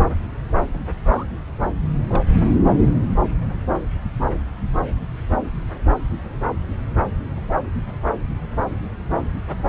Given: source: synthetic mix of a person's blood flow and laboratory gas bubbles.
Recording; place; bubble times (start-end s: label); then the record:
Doppler ultrasound of blood flow; subclavian vein
0.74-0.80 s: bubbles
1.08-1.26 s: bubbles
2.08-2.24 s: bubbles
5.32-5.41 s: bubbles
From the record:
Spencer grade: 2 (many but less than half of the cardiac periods contain bubble signals, singularly or in groups); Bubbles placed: anywhere in the cardiac cycle